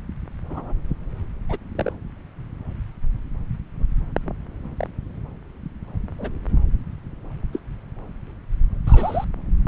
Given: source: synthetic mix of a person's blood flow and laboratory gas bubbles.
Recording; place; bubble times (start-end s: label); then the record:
Doppler ultrasound of blood flow; subclavian vein
0.50-0.73 s: bubbles
1.49-1.58 s: bubbles
1.75-1.93 s: bubbles
4.77-4.88 s: bubbles
6.19-6.29 s: bubbles
7.53-7.59 s: bubbles
8.87-9.24 s: bubbles
From the record:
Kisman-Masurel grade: 121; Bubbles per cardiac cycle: 1 to 2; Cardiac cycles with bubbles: 10 to 50%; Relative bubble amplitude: barely perceptible (0.100 to 0.250); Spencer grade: 2 (many but less than half of the cardiac periods contain bubble signals, singularly or in groups); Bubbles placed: anywhere in the cardiac cycle